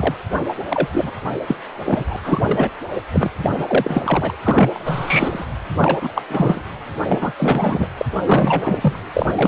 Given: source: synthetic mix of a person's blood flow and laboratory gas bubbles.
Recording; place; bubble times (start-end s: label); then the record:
Doppler ultrasound of blood flow; precordium
0.00-0.14 s: bubbles
0.69-0.88 s: bubbles
0.92-1.10 s: bubbles
1.47-1.55 s: bubbles
1.84-2.04 s: bubbles
2.10-2.16 s: bubbles
2.23-2.69 s: bubbles
3.13-3.30 s: bubbles
3.42-4.36 s: bubbles
4.43-5.46 s: bubbles
5.75-6.23 s: bubbles
6.29-6.62 s: bubbles
7.08-7.32 s: bubbles
7.37-7.88 s: bubbles
7.98-8.05 s: bubbles
8.25-8.99 s: bubbles
9.14-9.26 s: bubbles
9.29-9.48 s: bubbles
From the record:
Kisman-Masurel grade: 343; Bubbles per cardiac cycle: rolling drumbeat, 9 or more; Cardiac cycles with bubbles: 100%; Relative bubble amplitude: loud (0.450 to 0.775); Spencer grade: 3 (all of the cardiac periods contain showers or single bubble signals, but not dominating or overriding the cardiac motion signals); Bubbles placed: anywhere in the cardiac cycle